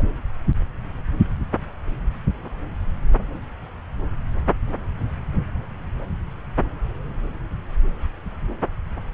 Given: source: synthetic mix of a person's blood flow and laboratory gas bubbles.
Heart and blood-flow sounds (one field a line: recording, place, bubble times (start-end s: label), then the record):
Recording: Doppler ultrasound of blood flow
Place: subclavian vein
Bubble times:
0.00-0.02 s: bubbles
From the record:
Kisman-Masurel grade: 113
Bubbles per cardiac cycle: 1 to 2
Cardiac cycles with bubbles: 1 to 10%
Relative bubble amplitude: loud (0.450 to 0.775)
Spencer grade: 1 (occasional bubble signal discernible with the cardiac motion signal, with majority of cardiac periods free of bubbles)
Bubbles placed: anywhere in the cardiac cycle